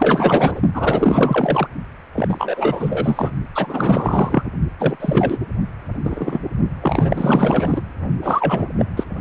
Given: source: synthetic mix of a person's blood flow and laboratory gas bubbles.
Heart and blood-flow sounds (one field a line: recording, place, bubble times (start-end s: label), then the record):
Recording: Doppler ultrasound of blood flow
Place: precordium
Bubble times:
0.00-0.61 s: bubbles
0.74-1.68 s: bubbles
2.14-3.31 s: bubbles
3.54-4.44 s: bubbles
4.78-4.97 s: bubbles
5.00-5.37 s: bubbles
6.04-6.39 s: bubbles
6.82-7.82 s: bubbles
8.22-8.66 s: bubbles
8.75-8.86 s: bubbles
8.96-9.04 s: bubbles
From the record:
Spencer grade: 4 (maximum detectable bubble signal sounding continuously throughout systole and diastole of every cardiac period, and overriding the amplitude of the normal cardiac signals)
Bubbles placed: only in the low amplitude regions of the cardiac cycle